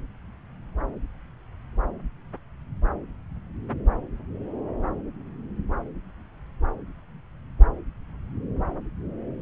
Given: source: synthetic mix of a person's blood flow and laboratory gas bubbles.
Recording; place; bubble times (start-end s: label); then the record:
Doppler ultrasound of blood flow; subclavian vein
no bubbles
From the record:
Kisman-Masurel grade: 000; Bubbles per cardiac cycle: 0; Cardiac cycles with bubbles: 0%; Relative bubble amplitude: no bubbles discernible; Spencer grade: 0 (complete lack of bubble signals)